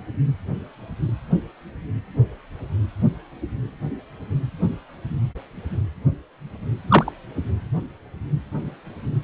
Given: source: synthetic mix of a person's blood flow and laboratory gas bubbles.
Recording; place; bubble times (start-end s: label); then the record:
Doppler ultrasound of blood flow; precordium
6.88-7.12 s: bubbles
From the record:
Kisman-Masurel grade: 113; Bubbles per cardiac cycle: 1 to 2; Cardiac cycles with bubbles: 1 to 10%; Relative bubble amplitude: loud (0.450 to 0.775); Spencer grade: 1 (occasional bubble signal discernible with the cardiac motion signal, with majority of cardiac periods free of bubbles); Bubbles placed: anywhere in the cardiac cycle